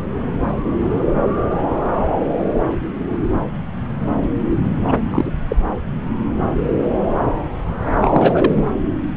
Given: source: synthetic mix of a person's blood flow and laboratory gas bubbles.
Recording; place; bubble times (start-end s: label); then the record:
Doppler ultrasound of blood flow; subclavian vein
4.88-4.99 s: bubbles
5.10-5.31 s: bubbles
5.49-5.56 s: bubbles
8.01-8.65 s: bubbles
From the record:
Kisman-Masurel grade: 223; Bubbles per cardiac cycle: several, 3 to 8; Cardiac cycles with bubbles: 10 to 50%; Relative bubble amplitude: loud (0.450 to 0.775); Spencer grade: 2 (many but less than half of the cardiac periods contain bubble signals, singularly or in groups); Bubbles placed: anywhere in the cardiac cycle